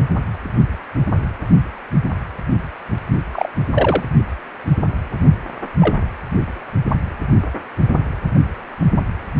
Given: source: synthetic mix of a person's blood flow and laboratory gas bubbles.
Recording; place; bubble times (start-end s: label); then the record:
Doppler ultrasound of blood flow; precordium
3.32-3.48 s: bubbles
3.74-4.04 s: bubbles
5.80-5.95 s: bubbles
From the record:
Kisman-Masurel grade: 123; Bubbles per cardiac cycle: 1 to 2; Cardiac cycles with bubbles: 10 to 50%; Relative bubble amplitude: loud (0.450 to 0.775); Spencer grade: 2 (many but less than half of the cardiac periods contain bubble signals, singularly or in groups); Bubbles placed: only in the low amplitude regions of the cardiac cycle